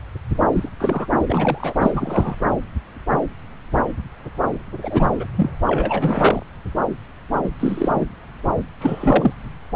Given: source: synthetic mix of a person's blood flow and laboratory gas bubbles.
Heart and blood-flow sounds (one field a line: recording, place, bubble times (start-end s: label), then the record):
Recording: Doppler ultrasound of blood flow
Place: subclavian vein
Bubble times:
0.52-0.69 s: bubbles
0.79-1.06 s: bubbles
1.26-2.36 s: bubbles
4.82-5.27 s: bubbles
5.36-5.50 s: bubbles
5.67-6.43 s: bubbles
7.44-7.50 s: bubbles
7.60-8.04 s: bubbles
8.80-9.34 s: bubbles
From the record:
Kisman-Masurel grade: 232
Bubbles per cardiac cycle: several, 3 to 8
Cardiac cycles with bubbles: 50 to 99%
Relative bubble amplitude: moderate (0.250 to 0.450)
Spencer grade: 3 (all of the cardiac periods contain showers or single bubble signals, but not dominating or overriding the cardiac motion signals)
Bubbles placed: anywhere in the cardiac cycle